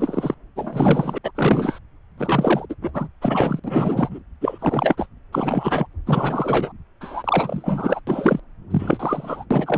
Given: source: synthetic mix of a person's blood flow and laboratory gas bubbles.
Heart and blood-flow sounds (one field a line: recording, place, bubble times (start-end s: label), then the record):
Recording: Doppler ultrasound of blood flow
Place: subclavian vein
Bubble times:
0.00-0.34 s: bubbles
0.56-1.18 s: bubbles
1.24-1.31 s: bubbles
1.35-1.79 s: bubbles
2.18-2.66 s: bubbles
2.70-2.75 s: bubbles
2.82-2.90 s: bubbles
2.94-3.08 s: bubbles
3.22-3.60 s: bubbles
3.64-4.19 s: bubbles
4.41-4.58 s: bubbles
4.62-5.06 s: bubbles
5.33-5.87 s: bubbles
6.07-6.72 s: bubbles
7.01-8.00 s: bubbles
8.07-8.40 s: bubbles
8.71-9.44 s: bubbles
9.50-9.78 s: bubbles
From the record:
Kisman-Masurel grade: 342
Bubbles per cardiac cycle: rolling drumbeat, 9 or more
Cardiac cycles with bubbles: 100%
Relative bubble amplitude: moderate (0.250 to 0.450)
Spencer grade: 3 (all of the cardiac periods contain showers or single bubble signals, but not dominating or overriding the cardiac motion signals)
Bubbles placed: anywhere in the cardiac cycle